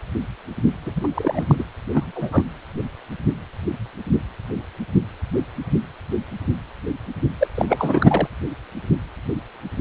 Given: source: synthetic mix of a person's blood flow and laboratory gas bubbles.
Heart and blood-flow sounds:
Doppler ultrasound of blood flow; precordium
0.85-0.93 s: bubbles
0.95-1.08 s: bubbles
1.15-1.45 s: bubbles
1.47-1.55 s: bubbles
1.58-1.64 s: bubbles
1.94-2.11 s: bubbles
2.15-2.44 s: bubbles
7.39-7.47 s: bubbles
7.54-7.66 s: bubbles
7.68-8.28 s: bubbles
From the record:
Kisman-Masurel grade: 223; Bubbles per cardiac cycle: several, 3 to 8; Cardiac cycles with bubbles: 10 to 50%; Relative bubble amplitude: loud (0.450 to 0.775); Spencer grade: 2 (many but less than half of the cardiac periods contain bubble signals, singularly or in groups); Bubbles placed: anywhere in the cardiac cycle

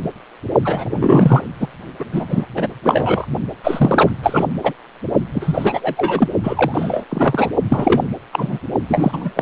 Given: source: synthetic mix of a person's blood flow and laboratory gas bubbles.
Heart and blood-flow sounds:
Doppler ultrasound of blood flow; precordium
0.65-1.44 s: bubbles
1.60-1.68 s: bubbles
1.99-2.04 s: bubbles
2.12-2.46 s: bubbles
2.56-2.68 s: bubbles
2.83-3.26 s: bubbles
3.64-4.11 s: bubbles
4.23-4.45 s: bubbles
4.63-4.73 s: bubbles
5.34-6.29 s: bubbles
6.43-7.04 s: bubbles
7.09-7.50 s: bubbles
7.69-8.07 s: bubbles
8.32-8.58 s: bubbles
8.88-9.31 s: bubbles
9.36-9.42 s: bubbles
From the record:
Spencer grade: 3 (all of the cardiac periods contain showers or single bubble signals, but not dominating or overriding the cardiac motion signals); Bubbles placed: only in the low amplitude regions of the cardiac cycle

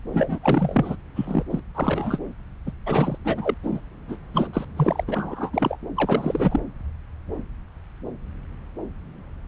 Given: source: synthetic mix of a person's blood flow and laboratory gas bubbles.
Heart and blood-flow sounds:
Doppler ultrasound of blood flow; subclavian vein
0.12-0.38 s: bubbles
0.42-0.96 s: bubbles
1.16-1.43 s: bubbles
1.50-1.59 s: bubbles
1.75-2.19 s: bubbles
2.66-2.71 s: bubbles
2.86-3.18 s: bubbles
3.25-3.54 s: bubbles
3.63-3.81 s: bubbles
4.08-4.16 s: bubbles
4.33-4.48 s: bubbles
4.53-4.65 s: bubbles
4.76-5.04 s: bubbles
5.07-5.50 s: bubbles
5.53-5.77 s: bubbles
5.96-6.60 s: bubbles
From the record:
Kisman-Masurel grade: 332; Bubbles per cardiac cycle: rolling drumbeat, 9 or more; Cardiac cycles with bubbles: 50 to 99%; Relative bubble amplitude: moderate (0.250 to 0.450); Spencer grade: 3 (all of the cardiac periods contain showers or single bubble signals, but not dominating or overriding the cardiac motion signals); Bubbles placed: anywhere in the cardiac cycle

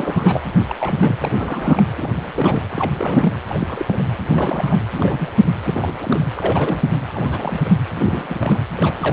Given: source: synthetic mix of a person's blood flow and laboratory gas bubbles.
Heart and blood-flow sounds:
Doppler ultrasound of blood flow; precordium
0.00-0.40 s: bubbles
0.68-0.76 s: bubbles
0.80-0.96 s: bubbles
0.98-1.15 s: bubbles
1.20-1.83 s: bubbles
1.97-2.11 s: bubbles
2.16-2.62 s: bubbles
2.71-3.39 s: bubbles
3.48-4.02 s: bubbles
4.28-4.79 s: bubbles
4.95-5.30 s: bubbles
5.63-7.00 s: bubbles
7.13-7.70 s: bubbles
7.96-8.61 s: bubbles
8.77-8.95 s: bubbles
9.00-9.13 s: bubbles
From the record:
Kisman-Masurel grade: 332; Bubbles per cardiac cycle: rolling drumbeat, 9 or more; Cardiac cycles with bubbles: 50 to 99%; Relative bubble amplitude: moderate (0.250 to 0.450); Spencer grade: 3 (all of the cardiac periods contain showers or single bubble signals, but not dominating or overriding the cardiac motion signals); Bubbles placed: anywhere in the cardiac cycle

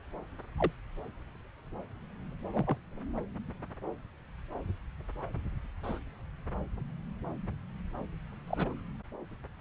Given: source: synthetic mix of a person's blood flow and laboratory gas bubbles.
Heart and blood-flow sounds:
Doppler ultrasound of blood flow; subclavian vein
0.58-0.71 s: bubbles
2.54-2.78 s: bubbles
3.17-3.21 s: bubbles
5.83-6.00 s: bubbles
8.47-8.80 s: bubbles
From the record:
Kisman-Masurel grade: 121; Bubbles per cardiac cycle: 1 to 2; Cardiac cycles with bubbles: 10 to 50%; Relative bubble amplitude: barely perceptible (0.100 to 0.250); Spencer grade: 2 (many but less than half of the cardiac periods contain bubble signals, singularly or in groups); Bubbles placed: anywhere in the cardiac cycle

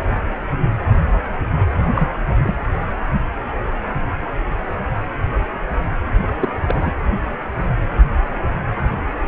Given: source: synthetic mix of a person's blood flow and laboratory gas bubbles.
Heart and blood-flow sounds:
Doppler ultrasound of blood flow; precordium
1.95-2.08 s: bubbles
2.29-2.34 s: bubbles
2.44-2.58 s: bubbles
6.42-6.49 s: bubbles
6.66-6.91 s: bubbles
From the record:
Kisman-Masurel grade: 222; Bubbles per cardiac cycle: several, 3 to 8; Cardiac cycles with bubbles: 10 to 50%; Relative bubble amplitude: moderate (0.250 to 0.450); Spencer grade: 2 (many but less than half of the cardiac periods contain bubble signals, singularly or in groups); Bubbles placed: anywhere in the cardiac cycle

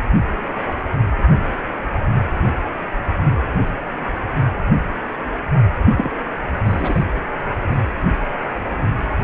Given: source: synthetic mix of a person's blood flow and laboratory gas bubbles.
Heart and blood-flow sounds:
Doppler ultrasound of blood flow; precordium
5.96-6.11 s: bubbles
6.64-7.03 s: bubbles
From the record:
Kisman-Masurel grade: 212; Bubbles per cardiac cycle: several, 3 to 8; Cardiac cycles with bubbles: 1 to 10%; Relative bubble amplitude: moderate (0.250 to 0.450); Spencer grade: 1 (occasional bubble signal discernible with the cardiac motion signal, with majority of cardiac periods free of bubbles); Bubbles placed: only in the low amplitude regions of the cardiac cycle

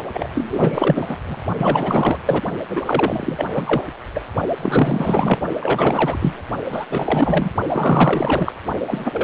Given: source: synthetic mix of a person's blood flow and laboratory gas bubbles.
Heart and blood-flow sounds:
Doppler ultrasound of blood flow; precordium
0.14-1.19 s: bubbles
1.25-1.41 s: bubbles
1.57-2.19 s: bubbles
2.26-2.42 s: bubbles
2.70-2.81 s: bubbles
2.85-3.46 s: bubbles
3.54-3.87 s: bubbles
4.14-4.21 s: bubbles
4.57-5.40 s: bubbles
5.59-6.42 s: bubbles
6.70-6.85 s: bubbles
6.90-7.50 s: bubbles
7.69-8.53 s: bubbles
8.87-9.24 s: bubbles
From the record:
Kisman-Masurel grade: 444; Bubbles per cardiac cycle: continuous sound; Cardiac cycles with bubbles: 100%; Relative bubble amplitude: maximal (0.775 to 0.999); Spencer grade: 4 (maximum detectable bubble signal sounding continuously throughout systole and diastole of every cardiac period, and overriding the amplitude of the normal cardiac signals); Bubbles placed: only in the low amplitude regions of the cardiac cycle

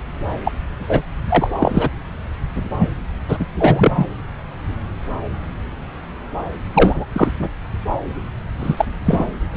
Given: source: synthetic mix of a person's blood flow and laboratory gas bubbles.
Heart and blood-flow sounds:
Doppler ultrasound of blood flow; subclavian vein
0.44-0.52 s: bubbles
0.78-1.02 s: bubbles
1.28-1.52 s: bubbles
1.58-1.89 s: bubbles
2.79-2.89 s: bubbles
3.28-3.46 s: bubbles
3.60-4.07 s: bubbles
6.74-7.05 s: bubbles
7.12-7.29 s: bubbles
7.39-7.49 s: bubbles
8.59-8.85 s: bubbles
9.05-9.26 s: bubbles
9.53-9.57 s: bubbles
From the record:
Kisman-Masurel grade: 233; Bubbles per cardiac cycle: several, 3 to 8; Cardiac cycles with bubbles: 50 to 99%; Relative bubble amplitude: loud (0.450 to 0.775); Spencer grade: 3 (all of the cardiac periods contain showers or single bubble signals, but not dominating or overriding the cardiac motion signals); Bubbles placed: anywhere in the cardiac cycle

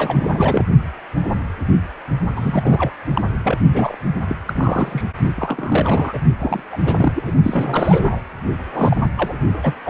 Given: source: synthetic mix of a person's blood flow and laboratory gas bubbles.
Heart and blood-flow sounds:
Doppler ultrasound of blood flow; precordium
0.00-0.65 s: bubbles
2.35-2.92 s: bubbles
3.14-3.21 s: bubbles
3.44-3.58 s: bubbles
3.71-3.96 s: bubbles
4.28-4.37 s: bubbles
4.46-5.04 s: bubbles
5.37-6.19 s: bubbles
6.39-6.66 s: bubbles
6.72-6.78 s: bubbles
6.85-7.12 s: bubbles
7.16-7.32 s: bubbles
7.43-8.22 s: bubbles
8.73-9.08 s: bubbles
9.17-9.34 s: bubbles
9.62-9.74 s: bubbles
9.85-9.90 s: bubbles
From the record:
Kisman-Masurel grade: 332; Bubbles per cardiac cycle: rolling drumbeat, 9 or more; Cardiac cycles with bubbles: 50 to 99%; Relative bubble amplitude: moderate (0.250 to 0.450); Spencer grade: 3 (all of the cardiac periods contain showers or single bubble signals, but not dominating or overriding the cardiac motion signals); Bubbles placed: only in the low amplitude regions of the cardiac cycle

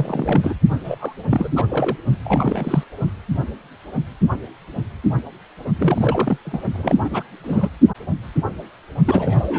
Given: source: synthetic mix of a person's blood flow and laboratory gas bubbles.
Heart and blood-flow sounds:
Doppler ultrasound of blood flow; precordium
0.00-0.53 s: bubbles
0.84-1.13 s: bubbles
1.30-1.52 s: bubbles
1.55-1.66 s: bubbles
1.70-1.96 s: bubbles
2.24-2.83 s: bubbles
5.75-6.37 s: bubbles
6.45-6.60 s: bubbles
6.73-7.22 s: bubbles
7.43-7.69 s: bubbles
9.05-9.59 s: bubbles
From the record:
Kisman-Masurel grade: 332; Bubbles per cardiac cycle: rolling drumbeat, 9 or more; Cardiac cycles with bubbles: 50 to 99%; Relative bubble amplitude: moderate (0.250 to 0.450); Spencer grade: 3 (all of the cardiac periods contain showers or single bubble signals, but not dominating or overriding the cardiac motion signals); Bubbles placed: only in the low amplitude regions of the cardiac cycle

